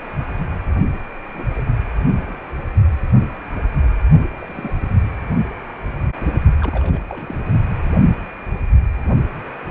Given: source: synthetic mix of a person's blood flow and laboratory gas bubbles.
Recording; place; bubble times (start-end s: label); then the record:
Doppler ultrasound of blood flow; precordium
0.92-0.99 s: bubbles
1.33-1.48 s: bubbles
1.51-1.73 s: bubbles
1.98-2.33 s: bubbles
4.40-4.78 s: bubbles
4.80-4.89 s: bubbles
6.61-7.05 s: bubbles
7.09-7.43 s: bubbles
From the record:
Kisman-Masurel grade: 221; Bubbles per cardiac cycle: several, 3 to 8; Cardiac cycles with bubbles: 10 to 50%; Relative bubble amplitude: barely perceptible (0.100 to 0.250); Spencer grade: 2 (many but less than half of the cardiac periods contain bubble signals, singularly or in groups); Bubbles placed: only in the low amplitude regions of the cardiac cycle